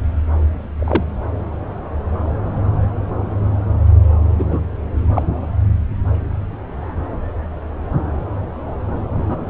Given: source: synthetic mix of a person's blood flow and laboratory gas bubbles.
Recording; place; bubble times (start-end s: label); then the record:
Doppler ultrasound of blood flow; subclavian vein
0.79-1.04 s: bubbles
4.38-4.66 s: bubbles
5.13-5.22 s: bubbles
9.28-9.37 s: bubbles
From the record:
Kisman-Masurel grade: 123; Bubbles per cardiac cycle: 1 to 2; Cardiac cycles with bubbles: 10 to 50%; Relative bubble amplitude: loud (0.450 to 0.775); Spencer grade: 2 (many but less than half of the cardiac periods contain bubble signals, singularly or in groups); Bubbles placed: anywhere in the cardiac cycle